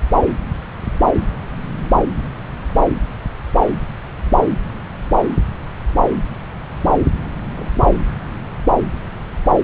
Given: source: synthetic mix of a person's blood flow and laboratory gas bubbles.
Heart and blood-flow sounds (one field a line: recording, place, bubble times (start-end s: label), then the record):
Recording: Doppler ultrasound of blood flow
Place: subclavian vein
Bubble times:
7.23-7.28 s: bubbles
7.55-8.01 s: bubbles
From the record:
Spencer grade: 1 (occasional bubble signal discernible with the cardiac motion signal, with majority of cardiac periods free of bubbles)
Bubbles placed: anywhere in the cardiac cycle